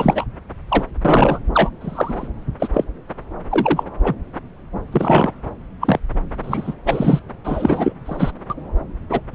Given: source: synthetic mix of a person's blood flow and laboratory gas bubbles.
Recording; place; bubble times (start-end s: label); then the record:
Doppler ultrasound of blood flow; subclavian vein
0.00-0.26 s: bubbles
0.68-0.83 s: bubbles
1.04-1.40 s: bubbles
1.53-1.71 s: bubbles
1.80-2.28 s: bubbles
2.59-2.68 s: bubbles
2.74-2.84 s: bubbles
3.50-3.83 s: bubbles
4.04-4.15 s: bubbles
4.92-5.33 s: bubbles
5.81-5.99 s: bubbles
6.43-6.75 s: bubbles
6.85-7.20 s: bubbles
7.44-7.93 s: bubbles
8.05-8.31 s: bubbles
8.50-8.54 s: bubbles
9.09-9.21 s: bubbles
9.33-9.35 s: bubbles
From the record:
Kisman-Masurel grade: 233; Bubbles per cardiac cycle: several, 3 to 8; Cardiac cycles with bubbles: 50 to 99%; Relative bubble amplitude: loud (0.450 to 0.775); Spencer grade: 3 (all of the cardiac periods contain showers or single bubble signals, but not dominating or overriding the cardiac motion signals); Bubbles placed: anywhere in the cardiac cycle